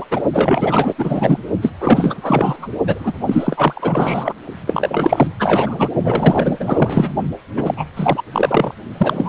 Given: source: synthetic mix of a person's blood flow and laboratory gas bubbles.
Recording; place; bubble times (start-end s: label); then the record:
Doppler ultrasound of blood flow; precordium
0.00-0.05 s: bubbles
0.11-0.24 s: bubbles
0.33-0.94 s: bubbles
0.97-1.38 s: bubbles
1.62-1.71 s: bubbles
1.80-2.69 s: bubbles
2.87-3.14 s: bubbles
3.27-4.33 s: bubbles
4.67-5.27 s: bubbles
5.40-5.88 s: bubbles
6.03-7.10 s: bubbles
7.57-7.74 s: bubbles
7.76-7.85 s: bubbles
7.96-8.22 s: bubbles
8.32-8.74 s: bubbles
8.97-9.29 s: bubbles
From the record:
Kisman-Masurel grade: 444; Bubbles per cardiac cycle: continuous sound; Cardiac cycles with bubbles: 100%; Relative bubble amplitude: maximal (0.775 to 0.999); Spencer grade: 4 (maximum detectable bubble signal sounding continuously throughout systole and diastole of every cardiac period, and overriding the amplitude of the normal cardiac signals); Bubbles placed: only in the low amplitude regions of the cardiac cycle